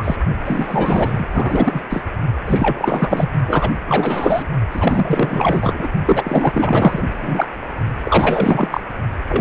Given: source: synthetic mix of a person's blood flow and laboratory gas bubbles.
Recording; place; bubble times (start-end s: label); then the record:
Doppler ultrasound of blood flow; precordium
0.00-0.16 s: bubbles
0.45-1.29 s: bubbles
1.31-1.81 s: bubbles
1.90-2.03 s: bubbles
2.46-3.29 s: bubbles
3.48-3.71 s: bubbles
3.87-4.46 s: bubbles
4.71-5.89 s: bubbles
6.06-7.03 s: bubbles
7.21-7.48 s: bubbles
8.04-8.68 s: bubbles
8.71-8.80 s: bubbles
9.28-9.41 s: bubbles
From the record:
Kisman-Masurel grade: 444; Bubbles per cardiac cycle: continuous sound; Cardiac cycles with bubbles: 100%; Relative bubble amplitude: maximal (0.775 to 0.999); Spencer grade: 4 (maximum detectable bubble signal sounding continuously throughout systole and diastole of every cardiac period, and overriding the amplitude of the normal cardiac signals); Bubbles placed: only in the low amplitude regions of the cardiac cycle